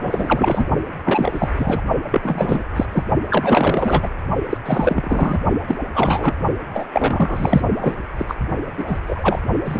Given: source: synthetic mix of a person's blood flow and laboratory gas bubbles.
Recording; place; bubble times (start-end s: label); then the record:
Doppler ultrasound of blood flow; precordium
0.00-0.66 s: bubbles
1.04-1.49 s: bubbles
1.57-1.82 s: bubbles
2.11-2.63 s: bubbles
2.76-2.85 s: bubbles
2.92-3.04 s: bubbles
3.30-4.11 s: bubbles
4.50-4.58 s: bubbles
4.65-5.40 s: bubbles
5.67-5.75 s: bubbles
5.94-6.34 s: bubbles
6.74-6.88 s: bubbles
6.92-7.62 s: bubbles
7.79-7.95 s: bubbles
8.18-8.25 s: bubbles
8.28-8.34 s: bubbles
8.77-9.00 s: bubbles
9.07-9.39 s: bubbles
9.65-9.80 s: bubbles
From the record:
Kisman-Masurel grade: 343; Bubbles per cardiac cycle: rolling drumbeat, 9 or more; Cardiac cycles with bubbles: 100%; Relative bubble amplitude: loud (0.450 to 0.775); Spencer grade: 3 (all of the cardiac periods contain showers or single bubble signals, but not dominating or overriding the cardiac motion signals); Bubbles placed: only in the low amplitude regions of the cardiac cycle